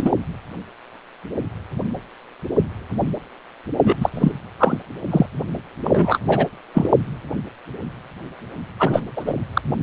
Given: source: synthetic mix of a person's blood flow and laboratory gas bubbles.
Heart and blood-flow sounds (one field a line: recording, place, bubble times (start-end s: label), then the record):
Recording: Doppler ultrasound of blood flow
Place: precordium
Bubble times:
0.00-0.11 s: bubbles
3.83-3.96 s: bubbles
4.00-4.09 s: bubbles
4.13-4.32 s: bubbles
4.59-4.78 s: bubbles
5.10-5.26 s: bubbles
5.83-6.19 s: bubbles
6.28-6.46 s: bubbles
6.74-6.89 s: bubbles
8.79-9.01 s: bubbles
9.16-9.35 s: bubbles
9.54-9.62 s: bubbles
From the record:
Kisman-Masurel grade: 233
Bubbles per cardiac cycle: several, 3 to 8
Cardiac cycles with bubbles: 50 to 99%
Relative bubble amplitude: loud (0.450 to 0.775)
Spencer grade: 3 (all of the cardiac periods contain showers or single bubble signals, but not dominating or overriding the cardiac motion signals)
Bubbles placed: only in the low amplitude regions of the cardiac cycle